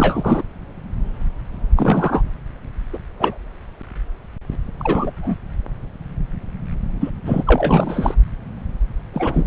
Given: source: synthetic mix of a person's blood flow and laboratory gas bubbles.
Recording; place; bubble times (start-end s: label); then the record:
Doppler ultrasound of blood flow; subclavian vein
0.00-0.42 s: bubbles
1.76-2.22 s: bubbles
2.93-2.99 s: bubbles
3.19-3.38 s: bubbles
4.79-5.12 s: bubbles
5.17-5.35 s: bubbles
7.00-7.10 s: bubbles
7.25-7.42 s: bubbles
7.46-8.15 s: bubbles
9.13-9.46 s: bubbles
From the record:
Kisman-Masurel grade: 223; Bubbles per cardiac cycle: several, 3 to 8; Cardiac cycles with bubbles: 10 to 50%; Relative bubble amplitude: loud (0.450 to 0.775); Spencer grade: 2 (many but less than half of the cardiac periods contain bubble signals, singularly or in groups); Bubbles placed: anywhere in the cardiac cycle